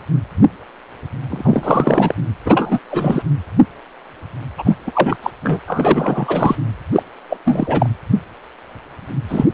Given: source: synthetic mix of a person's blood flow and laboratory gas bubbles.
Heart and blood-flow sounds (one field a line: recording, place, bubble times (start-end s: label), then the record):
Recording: Doppler ultrasound of blood flow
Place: precordium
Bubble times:
1.29-2.15 s: bubbles
2.46-2.79 s: bubbles
2.88-3.23 s: bubbles
4.58-4.78 s: bubbles
4.87-5.17 s: bubbles
5.22-5.30 s: bubbles
5.43-5.59 s: bubbles
5.67-6.55 s: bubbles
6.92-7.03 s: bubbles
7.29-7.37 s: bubbles
7.45-7.89 s: bubbles
9.29-9.46 s: bubbles
From the record:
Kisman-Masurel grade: 333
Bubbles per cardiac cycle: rolling drumbeat, 9 or more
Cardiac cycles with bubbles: 50 to 99%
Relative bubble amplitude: loud (0.450 to 0.775)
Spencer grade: 3 (all of the cardiac periods contain showers or single bubble signals, but not dominating or overriding the cardiac motion signals)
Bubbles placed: anywhere in the cardiac cycle